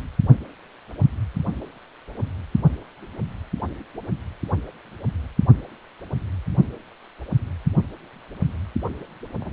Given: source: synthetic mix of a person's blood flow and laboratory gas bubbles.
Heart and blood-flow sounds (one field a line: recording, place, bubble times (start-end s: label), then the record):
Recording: Doppler ultrasound of blood flow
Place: precordium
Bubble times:
9.40-9.52 s: bubbles
From the record:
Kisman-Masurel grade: 211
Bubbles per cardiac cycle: several, 3 to 8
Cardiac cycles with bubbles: 1 to 10%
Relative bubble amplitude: barely perceptible (0.100 to 0.250)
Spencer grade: 1 (occasional bubble signal discernible with the cardiac motion signal, with majority of cardiac periods free of bubbles)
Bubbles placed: only in the low amplitude regions of the cardiac cycle